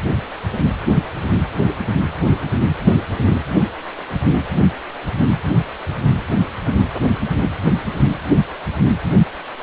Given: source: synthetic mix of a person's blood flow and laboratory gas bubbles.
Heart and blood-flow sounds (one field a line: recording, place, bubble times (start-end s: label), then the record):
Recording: Doppler ultrasound of blood flow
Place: precordium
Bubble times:
no bubbles
From the record:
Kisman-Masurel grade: 000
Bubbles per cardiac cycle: 0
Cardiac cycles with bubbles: 0%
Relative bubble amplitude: no bubbles discernible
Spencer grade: 0 (complete lack of bubble signals)